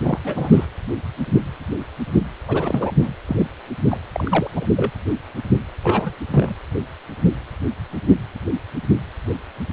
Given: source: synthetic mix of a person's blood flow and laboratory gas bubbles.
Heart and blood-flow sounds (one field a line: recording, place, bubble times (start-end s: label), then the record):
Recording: Doppler ultrasound of blood flow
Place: precordium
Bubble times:
0.02-0.19 s: bubbles
0.24-0.68 s: bubbles
2.48-2.91 s: bubbles
3.02-3.11 s: bubbles
3.28-3.48 s: bubbles
3.88-3.98 s: bubbles
4.12-4.50 s: bubbles
4.55-4.67 s: bubbles
4.76-4.90 s: bubbles
5.82-6.13 s: bubbles
6.32-6.54 s: bubbles
From the record:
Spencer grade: 3 (all of the cardiac periods contain showers or single bubble signals, but not dominating or overriding the cardiac motion signals)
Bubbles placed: anywhere in the cardiac cycle